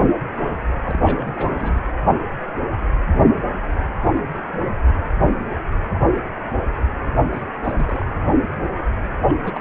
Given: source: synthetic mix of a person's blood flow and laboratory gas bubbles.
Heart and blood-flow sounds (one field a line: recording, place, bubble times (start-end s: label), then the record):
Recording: Doppler ultrasound of blood flow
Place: precordium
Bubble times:
0.85-1.81 s: bubbles
4.14-4.20 s: bubbles
4.53-4.58 s: bubbles
4.87-5.12 s: bubbles
7.33-7.41 s: bubbles
7.64-7.73 s: bubbles
7.78-8.05 s: bubbles
9.28-9.32 s: bubbles
9.42-9.59 s: bubbles
From the record:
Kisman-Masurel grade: 221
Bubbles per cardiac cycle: several, 3 to 8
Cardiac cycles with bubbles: 10 to 50%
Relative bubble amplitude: barely perceptible (0.100 to 0.250)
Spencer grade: 2 (many but less than half of the cardiac periods contain bubble signals, singularly or in groups)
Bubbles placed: anywhere in the cardiac cycle